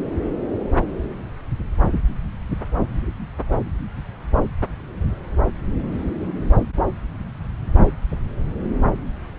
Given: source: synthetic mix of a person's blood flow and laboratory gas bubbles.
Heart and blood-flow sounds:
Doppler ultrasound of blood flow; subclavian vein
no bubbles
From the record:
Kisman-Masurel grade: 000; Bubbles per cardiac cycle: 0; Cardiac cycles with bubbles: 0%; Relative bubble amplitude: no bubbles discernible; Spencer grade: 0 (complete lack of bubble signals)

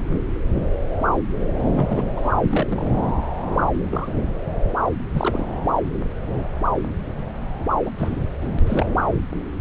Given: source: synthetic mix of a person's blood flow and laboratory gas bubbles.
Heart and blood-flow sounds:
Doppler ultrasound of blood flow; subclavian vein
1.69-2.09 s: bubbles
2.17-2.31 s: bubbles
2.42-2.88 s: bubbles
3.91-4.13 s: bubbles
5.13-5.46 s: bubbles
7.84-7.91 s: bubbles
7.99-8.24 s: bubbles
8.41-8.48 s: bubbles
8.67-8.86 s: bubbles
From the record:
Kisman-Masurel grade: 221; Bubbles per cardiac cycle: several, 3 to 8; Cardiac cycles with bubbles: 10 to 50%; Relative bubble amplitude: barely perceptible (0.100 to 0.250); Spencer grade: 2 (many but less than half of the cardiac periods contain bubble signals, singularly or in groups); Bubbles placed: anywhere in the cardiac cycle

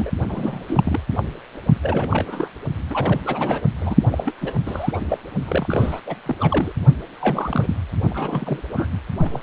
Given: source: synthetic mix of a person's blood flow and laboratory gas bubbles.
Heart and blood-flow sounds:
Doppler ultrasound of blood flow; precordium
0.00-0.12 s: bubbles
0.29-0.65 s: bubbles
0.68-1.00 s: bubbles
1.15-1.23 s: bubbles
1.82-2.48 s: bubbles
2.90-3.21 s: bubbles
3.25-3.61 s: bubbles
3.80-3.95 s: bubbles
4.11-4.33 s: bubbles
4.40-4.54 s: bubbles
4.67-5.01 s: bubbles
5.09-5.19 s: bubbles
5.46-6.00 s: bubbles
6.06-6.16 s: bubbles
6.26-6.36 s: bubbles
6.40-6.72 s: bubbles
7.20-7.76 s: bubbles
8.10-8.62 s: bubbles
8.74-8.88 s: bubbles
8.92-8.97 s: bubbles
9.21-9.39 s: bubbles
From the record:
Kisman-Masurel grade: 342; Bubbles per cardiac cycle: rolling drumbeat, 9 or more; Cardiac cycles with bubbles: 100%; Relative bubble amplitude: moderate (0.250 to 0.450); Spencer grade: 3 (all of the cardiac periods contain showers or single bubble signals, but not dominating or overriding the cardiac motion signals); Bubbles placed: only in the low amplitude regions of the cardiac cycle

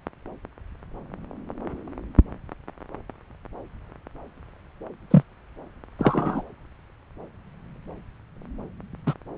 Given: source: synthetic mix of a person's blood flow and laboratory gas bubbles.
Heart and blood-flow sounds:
Doppler ultrasound of blood flow; subclavian vein
5.10-5.22 s: bubbles
5.98-6.42 s: bubbles
9.06-9.14 s: bubbles
From the record:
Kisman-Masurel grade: 123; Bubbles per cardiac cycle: 1 to 2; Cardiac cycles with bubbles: 10 to 50%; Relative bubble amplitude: loud (0.450 to 0.775); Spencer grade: 2 (many but less than half of the cardiac periods contain bubble signals, singularly or in groups); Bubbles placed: anywhere in the cardiac cycle

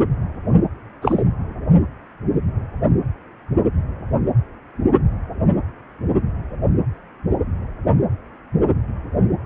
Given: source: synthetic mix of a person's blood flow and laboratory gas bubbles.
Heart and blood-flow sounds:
Doppler ultrasound of blood flow; precordium
1.01-1.22 s: bubbles
From the record:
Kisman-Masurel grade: 113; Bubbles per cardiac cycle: 1 to 2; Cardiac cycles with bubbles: 1 to 10%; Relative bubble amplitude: loud (0.450 to 0.775); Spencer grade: 1 (occasional bubble signal discernible with the cardiac motion signal, with majority of cardiac periods free of bubbles); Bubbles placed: anywhere in the cardiac cycle

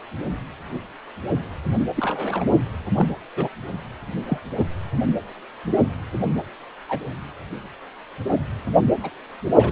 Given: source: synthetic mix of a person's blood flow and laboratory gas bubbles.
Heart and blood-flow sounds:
Doppler ultrasound of blood flow; precordium
1.96-2.45 s: bubbles
2.94-3.07 s: bubbles
3.36-3.48 s: bubbles
4.26-4.38 s: bubbles
4.58-4.67 s: bubbles
6.89-7.00 s: bubbles
9.03-9.10 s: bubbles
9.54-9.72 s: bubbles
From the record:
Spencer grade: 2 (many but less than half of the cardiac periods contain bubble signals, singularly or in groups); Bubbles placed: anywhere in the cardiac cycle

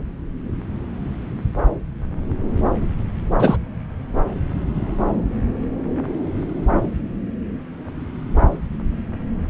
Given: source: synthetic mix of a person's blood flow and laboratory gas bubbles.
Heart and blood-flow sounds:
Doppler ultrasound of blood flow; subclavian vein
3.39-3.57 s: bubbles
From the record:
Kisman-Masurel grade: 123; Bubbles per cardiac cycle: 1 to 2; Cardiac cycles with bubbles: 10 to 50%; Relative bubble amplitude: loud (0.450 to 0.775); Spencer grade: 2 (many but less than half of the cardiac periods contain bubble signals, singularly or in groups); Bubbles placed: anywhere in the cardiac cycle

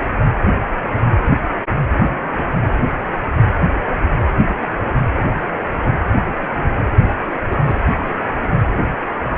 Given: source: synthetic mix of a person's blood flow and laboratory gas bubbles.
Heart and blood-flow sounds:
Doppler ultrasound of blood flow; precordium
7.50-7.63 s: bubbles
7.66-7.81 s: bubbles
From the record:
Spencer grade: 1 (occasional bubble signal discernible with the cardiac motion signal, with majority of cardiac periods free of bubbles); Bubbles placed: anywhere in the cardiac cycle

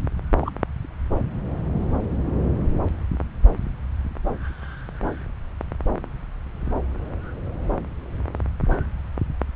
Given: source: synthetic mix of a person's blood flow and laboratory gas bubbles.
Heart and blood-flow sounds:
Doppler ultrasound of blood flow; subclavian vein
0.40-0.51 s: bubbles
From the record:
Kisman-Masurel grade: 112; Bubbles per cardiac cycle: 1 to 2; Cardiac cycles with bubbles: 1 to 10%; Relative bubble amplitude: moderate (0.250 to 0.450); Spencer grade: 1 (occasional bubble signal discernible with the cardiac motion signal, with majority of cardiac periods free of bubbles); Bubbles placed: anywhere in the cardiac cycle

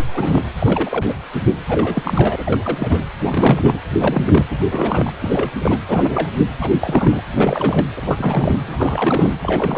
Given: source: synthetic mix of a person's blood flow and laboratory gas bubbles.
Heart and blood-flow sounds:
Doppler ultrasound of blood flow; precordium
0.00-0.04 s: bubbles
0.14-0.44 s: bubbles
0.59-1.13 s: bubbles
1.69-3.04 s: bubbles
3.24-3.78 s: bubbles
3.99-4.45 s: bubbles
4.50-4.63 s: bubbles
4.67-5.13 s: bubbles
5.21-5.50 s: bubbles
5.60-5.79 s: bubbles
5.86-6.30 s: bubbles
6.61-7.21 s: bubbles
7.33-7.86 s: bubbles
7.96-8.62 s: bubbles
8.68-9.37 s: bubbles
9.43-9.78 s: bubbles
From the record:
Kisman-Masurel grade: 342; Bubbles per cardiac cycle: rolling drumbeat, 9 or more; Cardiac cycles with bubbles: 100%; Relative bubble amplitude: moderate (0.250 to 0.450); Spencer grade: 3 (all of the cardiac periods contain showers or single bubble signals, but not dominating or overriding the cardiac motion signals); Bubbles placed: anywhere in the cardiac cycle

